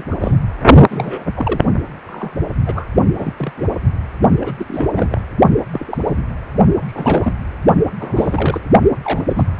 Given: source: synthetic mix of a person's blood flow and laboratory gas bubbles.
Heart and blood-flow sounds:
Doppler ultrasound of blood flow; precordium
0.00-0.04 s: bubbles
0.11-0.15 s: bubbles
0.20-0.40 s: bubbles
0.89-1.25 s: bubbles
1.36-1.60 s: bubbles
2.05-2.45 s: bubbles
2.66-2.87 s: bubbles
3.19-3.33 s: bubbles
3.37-3.52 s: bubbles
3.57-3.67 s: bubbles
4.40-4.54 s: bubbles
4.58-4.65 s: bubbles
4.69-5.21 s: bubbles
5.73-6.20 s: bubbles
6.86-7.33 s: bubbles
7.99-8.61 s: bubbles
9.04-9.22 s: bubbles
9.28-9.44 s: bubbles
9.56-9.60 s: bubbles
From the record:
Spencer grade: 3 (all of the cardiac periods contain showers or single bubble signals, but not dominating or overriding the cardiac motion signals); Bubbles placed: only in the low amplitude regions of the cardiac cycle

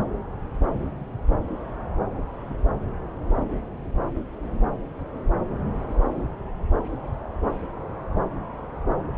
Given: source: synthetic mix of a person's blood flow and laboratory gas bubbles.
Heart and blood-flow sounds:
Doppler ultrasound of blood flow; subclavian vein
no bubbles
From the record:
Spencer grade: 0 (complete lack of bubble signals)

